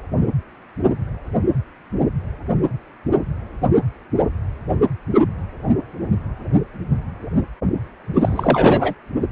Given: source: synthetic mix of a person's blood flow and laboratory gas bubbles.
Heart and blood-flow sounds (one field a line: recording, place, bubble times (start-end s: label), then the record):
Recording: Doppler ultrasound of blood flow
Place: precordium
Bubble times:
8.14-8.93 s: bubbles
From the record:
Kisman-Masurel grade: 213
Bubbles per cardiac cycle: several, 3 to 8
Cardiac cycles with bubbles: 1 to 10%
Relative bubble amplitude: loud (0.450 to 0.775)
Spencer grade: 1 (occasional bubble signal discernible with the cardiac motion signal, with majority of cardiac periods free of bubbles)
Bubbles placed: anywhere in the cardiac cycle